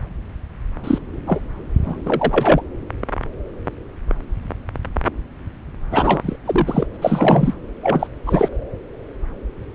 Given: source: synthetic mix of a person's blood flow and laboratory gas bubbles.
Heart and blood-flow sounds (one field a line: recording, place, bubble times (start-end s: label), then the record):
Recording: Doppler ultrasound of blood flow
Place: subclavian vein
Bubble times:
0.83-0.98 s: bubbles
1.27-1.40 s: bubbles
1.83-2.01 s: bubbles
2.05-2.61 s: bubbles
5.91-6.36 s: bubbles
6.46-6.87 s: bubbles
6.93-6.96 s: bubbles
7.01-7.54 s: bubbles
7.80-8.07 s: bubbles
8.26-8.49 s: bubbles
From the record:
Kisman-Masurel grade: 223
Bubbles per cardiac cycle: several, 3 to 8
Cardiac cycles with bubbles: 10 to 50%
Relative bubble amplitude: loud (0.450 to 0.775)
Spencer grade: 2 (many but less than half of the cardiac periods contain bubble signals, singularly or in groups)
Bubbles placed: anywhere in the cardiac cycle